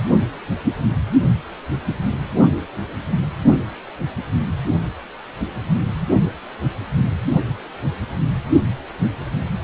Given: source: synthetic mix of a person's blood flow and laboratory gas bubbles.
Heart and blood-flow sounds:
Doppler ultrasound of blood flow; precordium
no bubbles
From the record:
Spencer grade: 0 (complete lack of bubble signals)

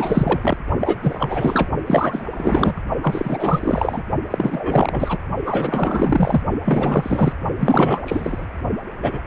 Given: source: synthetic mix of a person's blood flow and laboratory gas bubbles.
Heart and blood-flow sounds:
Doppler ultrasound of blood flow; precordium
0.00-0.57 s: bubbles
0.79-0.98 s: bubbles
1.03-1.69 s: bubbles
1.86-2.25 s: bubbles
2.31-2.80 s: bubbles
3.02-4.02 s: bubbles
4.30-5.18 s: bubbles
5.45-6.42 s: bubbles
6.64-7.32 s: bubbles
7.59-8.03 s: bubbles
8.05-8.46 s: bubbles
9.02-9.22 s: bubbles
From the record:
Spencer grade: 4 (maximum detectable bubble signal sounding continuously throughout systole and diastole of every cardiac period, and overriding the amplitude of the normal cardiac signals); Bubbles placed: only in the low amplitude regions of the cardiac cycle

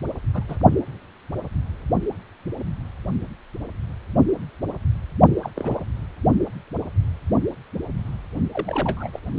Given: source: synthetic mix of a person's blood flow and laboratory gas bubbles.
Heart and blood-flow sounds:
Doppler ultrasound of blood flow; precordium
0.33-0.44 s: bubbles
0.48-0.56 s: bubbles
5.43-5.49 s: bubbles
5.56-5.86 s: bubbles
8.52-9.10 s: bubbles
9.13-9.20 s: bubbles
9.34-9.39 s: bubbles
From the record:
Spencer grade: 2 (many but less than half of the cardiac periods contain bubble signals, singularly or in groups); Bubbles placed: only in the low amplitude regions of the cardiac cycle

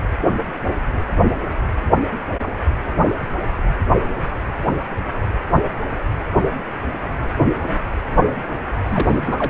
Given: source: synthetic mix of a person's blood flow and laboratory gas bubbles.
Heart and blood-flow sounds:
Doppler ultrasound of blood flow; precordium
8.86-9.50 s: bubbles
From the record:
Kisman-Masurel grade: 212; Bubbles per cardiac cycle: several, 3 to 8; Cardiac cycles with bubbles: 1 to 10%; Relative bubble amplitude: moderate (0.250 to 0.450); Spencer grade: 1 (occasional bubble signal discernible with the cardiac motion signal, with majority of cardiac periods free of bubbles); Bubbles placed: anywhere in the cardiac cycle

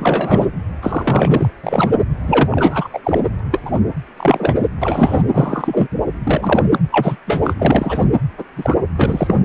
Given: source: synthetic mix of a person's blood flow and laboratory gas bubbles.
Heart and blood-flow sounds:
Doppler ultrasound of blood flow; precordium
0.00-0.47 s: bubbles
0.81-1.49 s: bubbles
1.63-1.91 s: bubbles
2.28-2.48 s: bubbles
2.51-2.88 s: bubbles
2.92-3.00 s: bubbles
3.04-3.21 s: bubbles
3.39-3.41 s: bubbles
3.52-3.62 s: bubbles
3.66-3.79 s: bubbles
4.17-4.54 s: bubbles
4.82-5.23 s: bubbles
5.33-5.88 s: bubbles
6.24-6.63 s: bubbles
6.72-6.79 s: bubbles
6.92-7.16 s: bubbles
7.27-7.54 s: bubbles
7.58-8.07 s: bubbles
8.38-8.43 s: bubbles
8.56-8.76 s: bubbles
8.96-9.35 s: bubbles
From the record:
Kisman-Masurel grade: 243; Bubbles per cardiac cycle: several, 3 to 8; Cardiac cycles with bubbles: 100%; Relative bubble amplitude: loud (0.450 to 0.775); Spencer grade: 3 (all of the cardiac periods contain showers or single bubble signals, but not dominating or overriding the cardiac motion signals); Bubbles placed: anywhere in the cardiac cycle

